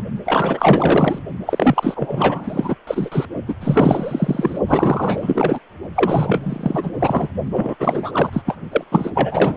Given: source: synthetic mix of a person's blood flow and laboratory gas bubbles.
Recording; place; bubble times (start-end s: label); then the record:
Doppler ultrasound of blood flow; precordium
0.00-0.03 s: bubbles
0.25-1.18 s: bubbles
1.45-2.76 s: bubbles
2.87-3.26 s: bubbles
3.48-3.54 s: bubbles
3.60-4.58 s: bubbles
4.67-5.60 s: bubbles
5.94-6.92 s: bubbles
7.00-7.29 s: bubbles
7.51-7.75 s: bubbles
7.79-8.29 s: bubbles
8.33-8.42 s: bubbles
8.45-8.57 s: bubbles
8.71-8.85 s: bubbles
8.91-9.11 s: bubbles
9.15-9.57 s: bubbles
From the record:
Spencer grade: 4 (maximum detectable bubble signal sounding continuously throughout systole and diastole of every cardiac period, and overriding the amplitude of the normal cardiac signals); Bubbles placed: only in the low amplitude regions of the cardiac cycle